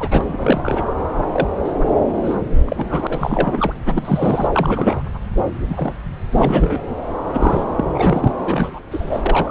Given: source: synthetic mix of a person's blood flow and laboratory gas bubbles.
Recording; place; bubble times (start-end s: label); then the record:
Doppler ultrasound of blood flow; subclavian vein
0.00-0.84 s: bubbles
1.19-1.23 s: bubbles
1.33-1.48 s: bubbles
1.65-1.72 s: bubbles
2.23-2.35 s: bubbles
2.65-3.73 s: bubbles
3.86-4.47 s: bubbles
4.53-5.03 s: bubbles
5.37-5.42 s: bubbles
5.69-5.93 s: bubbles
6.32-6.79 s: bubbles
7.26-7.65 s: bubbles
7.77-7.85 s: bubbles
7.95-8.32 s: bubbles
8.46-8.79 s: bubbles
8.91-9.22 s: bubbles
9.26-9.51 s: bubbles
From the record:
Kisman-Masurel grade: 242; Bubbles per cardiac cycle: several, 3 to 8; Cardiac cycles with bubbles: 100%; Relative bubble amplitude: moderate (0.250 to 0.450); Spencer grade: 3 (all of the cardiac periods contain showers or single bubble signals, but not dominating or overriding the cardiac motion signals); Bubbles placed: anywhere in the cardiac cycle